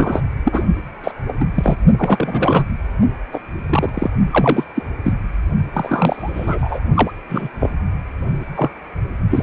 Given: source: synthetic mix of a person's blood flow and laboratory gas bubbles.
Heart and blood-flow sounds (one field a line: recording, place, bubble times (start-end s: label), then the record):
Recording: Doppler ultrasound of blood flow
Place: precordium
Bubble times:
0.00-0.22 s: bubbles
0.44-0.64 s: bubbles
1.04-1.11 s: bubbles
1.28-1.32 s: bubbles
1.40-1.46 s: bubbles
1.55-1.77 s: bubbles
1.98-2.65 s: bubbles
3.32-3.40 s: bubbles
3.69-3.90 s: bubbles
3.94-4.11 s: bubbles
4.31-4.64 s: bubbles
4.75-4.83 s: bubbles
5.04-5.14 s: bubbles
5.73-6.80 s: bubbles
6.94-7.11 s: bubbles
7.29-7.49 s: bubbles
7.59-7.71 s: bubbles
8.55-8.71 s: bubbles
9.30-9.43 s: bubbles
From the record:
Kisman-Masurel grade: 233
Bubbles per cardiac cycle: several, 3 to 8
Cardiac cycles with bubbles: 50 to 99%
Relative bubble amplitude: loud (0.450 to 0.775)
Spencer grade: 3 (all of the cardiac periods contain showers or single bubble signals, but not dominating or overriding the cardiac motion signals)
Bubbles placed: only in the low amplitude regions of the cardiac cycle